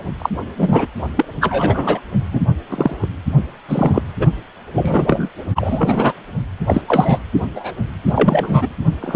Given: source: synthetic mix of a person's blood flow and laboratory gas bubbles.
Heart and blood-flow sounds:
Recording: Doppler ultrasound of blood flow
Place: precordium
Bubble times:
0.18-0.30 s: bubbles
0.57-0.87 s: bubbles
1.17-1.25 s: bubbles
1.40-2.00 s: bubbles
2.32-2.40 s: bubbles
2.69-2.94 s: bubbles
3.02-3.07 s: bubbles
3.68-4.03 s: bubbles
4.17-4.26 s: bubbles
4.74-5.29 s: bubbles
5.55-6.13 s: bubbles
6.67-6.82 s: bubbles
6.88-7.19 s: bubbles
7.55-7.74 s: bubbles
8.04-8.69 s: bubbles
9.01-9.16 s: bubbles
From the record:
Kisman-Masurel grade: 243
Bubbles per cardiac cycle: several, 3 to 8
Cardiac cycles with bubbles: 100%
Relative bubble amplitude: loud (0.450 to 0.775)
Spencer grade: 3 (all of the cardiac periods contain showers or single bubble signals, but not dominating or overriding the cardiac motion signals)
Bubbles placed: only in the low amplitude regions of the cardiac cycle

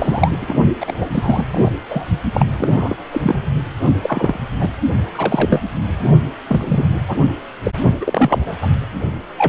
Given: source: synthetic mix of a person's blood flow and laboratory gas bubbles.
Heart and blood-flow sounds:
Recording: Doppler ultrasound of blood flow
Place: precordium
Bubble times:
0.00-0.55 s: bubbles
0.80-1.07 s: bubbles
1.12-1.44 s: bubbles
1.51-1.72 s: bubbles
1.90-2.04 s: bubbles
2.33-2.46 s: bubbles
2.58-2.96 s: bubbles
3.11-3.42 s: bubbles
4.03-4.39 s: bubbles
4.60-4.70 s: bubbles
5.14-5.62 s: bubbles
6.47-6.85 s: bubbles
7.07-7.16 s: bubbles
7.64-7.71 s: bubbles
8.00-8.54 s: bubbles
8.62-8.67 s: bubbles
9.38-9.48 s: bubbles
From the record:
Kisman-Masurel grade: 242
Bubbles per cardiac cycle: several, 3 to 8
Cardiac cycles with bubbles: 100%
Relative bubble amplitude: moderate (0.250 to 0.450)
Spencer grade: 3 (all of the cardiac periods contain showers or single bubble signals, but not dominating or overriding the cardiac motion signals)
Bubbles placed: only in the low amplitude regions of the cardiac cycle

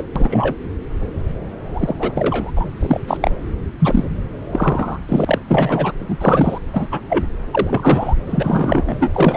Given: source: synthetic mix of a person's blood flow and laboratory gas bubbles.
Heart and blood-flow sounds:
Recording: Doppler ultrasound of blood flow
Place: subclavian vein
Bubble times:
0.00-0.02 s: bubbles
0.15-0.55 s: bubbles
1.74-1.95 s: bubbles
1.99-2.12 s: bubbles
2.17-2.51 s: bubbles
2.56-2.67 s: bubbles
2.79-2.98 s: bubbles
3.07-3.17 s: bubbles
3.21-3.31 s: bubbles
3.79-4.04 s: bubbles
4.52-4.98 s: bubbles
5.08-5.38 s: bubbles
5.47-5.92 s: bubbles
6.01-6.04 s: bubbles
6.08-6.17 s: bubbles
6.21-6.58 s: bubbles
6.73-6.87 s: bubbles
6.91-7.00 s: bubbles
7.09-7.25 s: bubbles
7.51-8.14 s: bubbles
8.27-8.95 s: bubbles
8.99-9.11 s: bubbles
9.14-9.37 s: bubbles
From the record:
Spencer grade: 3 (all of the cardiac periods contain showers or single bubble signals, but not dominating or overriding the cardiac motion signals)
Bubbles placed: anywhere in the cardiac cycle

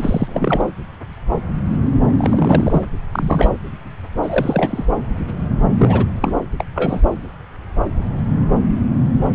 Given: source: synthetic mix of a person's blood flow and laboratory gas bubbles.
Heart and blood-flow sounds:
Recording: Doppler ultrasound of blood flow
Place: subclavian vein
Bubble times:
0.00-0.61 s: bubbles
2.18-2.85 s: bubbles
3.12-3.54 s: bubbles
4.22-4.85 s: bubbles
5.78-6.06 s: bubbles
6.20-6.41 s: bubbles
6.60-6.64 s: bubbles
6.75-7.01 s: bubbles
From the record:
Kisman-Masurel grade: 233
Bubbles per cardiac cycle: several, 3 to 8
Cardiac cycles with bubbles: 50 to 99%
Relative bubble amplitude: loud (0.450 to 0.775)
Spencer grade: 3 (all of the cardiac periods contain showers or single bubble signals, but not dominating or overriding the cardiac motion signals)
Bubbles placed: anywhere in the cardiac cycle

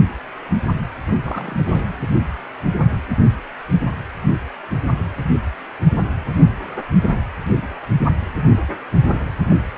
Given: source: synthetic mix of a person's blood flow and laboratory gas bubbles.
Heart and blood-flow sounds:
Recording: Doppler ultrasound of blood flow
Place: precordium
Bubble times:
1.22-1.83 s: bubbles
From the record:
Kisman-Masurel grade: 221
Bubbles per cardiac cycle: several, 3 to 8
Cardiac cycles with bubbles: 10 to 50%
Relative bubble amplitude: barely perceptible (0.100 to 0.250)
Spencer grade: 2 (many but less than half of the cardiac periods contain bubble signals, singularly or in groups)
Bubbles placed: anywhere in the cardiac cycle

